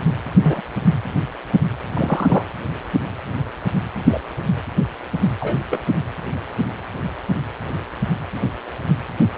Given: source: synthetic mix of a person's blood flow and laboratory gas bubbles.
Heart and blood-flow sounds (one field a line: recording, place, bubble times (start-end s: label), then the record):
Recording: Doppler ultrasound of blood flow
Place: precordium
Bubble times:
0.43-0.61 s: bubbles
1.94-2.44 s: bubbles
4.04-4.20 s: bubbles
5.39-5.57 s: bubbles
5.71-5.79 s: bubbles
From the record:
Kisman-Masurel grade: 123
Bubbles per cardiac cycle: 1 to 2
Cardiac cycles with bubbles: 10 to 50%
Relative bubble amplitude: loud (0.450 to 0.775)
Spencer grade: 2 (many but less than half of the cardiac periods contain bubble signals, singularly or in groups)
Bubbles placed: anywhere in the cardiac cycle